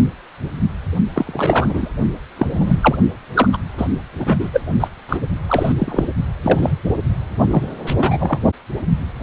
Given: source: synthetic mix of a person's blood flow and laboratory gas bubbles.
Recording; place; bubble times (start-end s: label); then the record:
Doppler ultrasound of blood flow; precordium
1.12-1.89 s: bubbles
2.36-2.98 s: bubbles
3.34-3.48 s: bubbles
3.52-3.57 s: bubbles
3.77-3.87 s: bubbles
4.19-4.50 s: bubbles
4.53-4.62 s: bubbles
4.80-4.88 s: bubbles
5.08-5.17 s: bubbles
5.48-5.72 s: bubbles
5.78-6.04 s: bubbles
6.43-6.73 s: bubbles
7.47-7.68 s: bubbles
7.86-8.40 s: bubbles
From the record:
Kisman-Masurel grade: 233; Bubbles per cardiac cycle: several, 3 to 8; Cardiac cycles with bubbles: 50 to 99%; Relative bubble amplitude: loud (0.450 to 0.775); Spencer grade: 3 (all of the cardiac periods contain showers or single bubble signals, but not dominating or overriding the cardiac motion signals); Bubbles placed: only in the low amplitude regions of the cardiac cycle